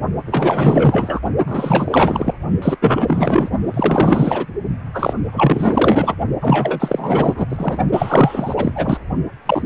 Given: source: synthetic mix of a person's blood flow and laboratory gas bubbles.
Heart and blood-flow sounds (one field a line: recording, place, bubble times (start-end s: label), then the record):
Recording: Doppler ultrasound of blood flow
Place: precordium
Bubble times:
0.26-1.20 s: bubbles
1.47-2.34 s: bubbles
2.62-2.78 s: bubbles
2.81-3.50 s: bubbles
3.74-4.46 s: bubbles
4.93-5.17 s: bubbles
5.32-6.14 s: bubbles
6.41-7.46 s: bubbles
7.49-7.79 s: bubbles
7.91-8.98 s: bubbles
9.46-9.66 s: bubbles
From the record:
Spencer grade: 4 (maximum detectable bubble signal sounding continuously throughout systole and diastole of every cardiac period, and overriding the amplitude of the normal cardiac signals)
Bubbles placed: only in the low amplitude regions of the cardiac cycle